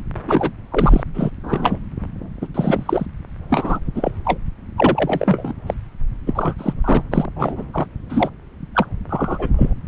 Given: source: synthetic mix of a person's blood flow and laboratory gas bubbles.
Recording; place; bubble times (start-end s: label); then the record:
Doppler ultrasound of blood flow; subclavian vein
0.27-0.52 s: bubbles
0.72-1.03 s: bubbles
1.14-1.29 s: bubbles
1.43-1.79 s: bubbles
2.41-2.48 s: bubbles
2.54-3.06 s: bubbles
3.50-3.80 s: bubbles
3.95-4.12 s: bubbles
4.25-4.38 s: bubbles
4.77-5.54 s: bubbles
5.66-5.74 s: bubbles
6.26-6.54 s: bubbles
6.58-6.73 s: bubbles
6.84-7.02 s: bubbles
7.11-7.25 s: bubbles
7.36-7.63 s: bubbles
7.73-7.86 s: bubbles
8.09-8.29 s: bubbles
8.74-8.86 s: bubbles
9.09-9.47 s: bubbles
9.57-9.73 s: bubbles
From the record:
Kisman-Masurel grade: 232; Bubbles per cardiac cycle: several, 3 to 8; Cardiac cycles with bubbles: 50 to 99%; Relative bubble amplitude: moderate (0.250 to 0.450); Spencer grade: 3 (all of the cardiac periods contain showers or single bubble signals, but not dominating or overriding the cardiac motion signals); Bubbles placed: anywhere in the cardiac cycle